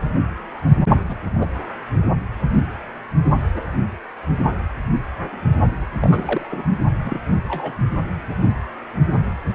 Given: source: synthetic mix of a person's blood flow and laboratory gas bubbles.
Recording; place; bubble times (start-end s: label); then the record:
Doppler ultrasound of blood flow; precordium
1.08-1.17 s: bubbles
1.33-1.47 s: bubbles
6.00-6.63 s: bubbles
7.02-7.19 s: bubbles
7.47-7.75 s: bubbles
From the record:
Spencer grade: 2 (many but less than half of the cardiac periods contain bubble signals, singularly or in groups); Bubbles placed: only in the low amplitude regions of the cardiac cycle